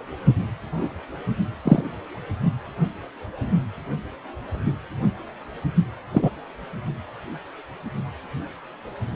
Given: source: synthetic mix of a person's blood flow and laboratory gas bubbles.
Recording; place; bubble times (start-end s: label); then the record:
Doppler ultrasound of blood flow; precordium
1.65-1.82 s: bubbles
6.12-6.30 s: bubbles
From the record:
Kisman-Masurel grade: 123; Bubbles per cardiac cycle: 1 to 2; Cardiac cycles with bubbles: 10 to 50%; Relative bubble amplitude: loud (0.450 to 0.775); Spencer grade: 2 (many but less than half of the cardiac periods contain bubble signals, singularly or in groups); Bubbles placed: only in the low amplitude regions of the cardiac cycle